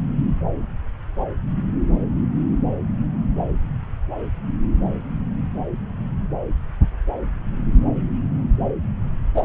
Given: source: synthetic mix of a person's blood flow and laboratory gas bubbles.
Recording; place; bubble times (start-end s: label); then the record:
Doppler ultrasound of blood flow; subclavian vein
9.34-9.45 s: bubbles
From the record:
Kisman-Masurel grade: 213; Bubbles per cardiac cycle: several, 3 to 8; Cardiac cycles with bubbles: 1 to 10%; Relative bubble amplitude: loud (0.450 to 0.775); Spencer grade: 1 (occasional bubble signal discernible with the cardiac motion signal, with majority of cardiac periods free of bubbles); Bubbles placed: anywhere in the cardiac cycle